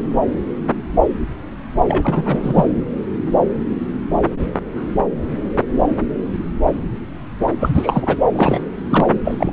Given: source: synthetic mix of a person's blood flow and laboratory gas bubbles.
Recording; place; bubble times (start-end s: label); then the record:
Doppler ultrasound of blood flow; subclavian vein
1.88-2.66 s: bubbles
7.59-8.18 s: bubbles
8.35-8.59 s: bubbles
8.90-9.11 s: bubbles
9.24-9.53 s: bubbles
From the record:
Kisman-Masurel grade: 223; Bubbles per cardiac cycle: several, 3 to 8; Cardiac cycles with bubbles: 10 to 50%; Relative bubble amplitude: loud (0.450 to 0.775); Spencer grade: 2 (many but less than half of the cardiac periods contain bubble signals, singularly or in groups); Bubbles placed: anywhere in the cardiac cycle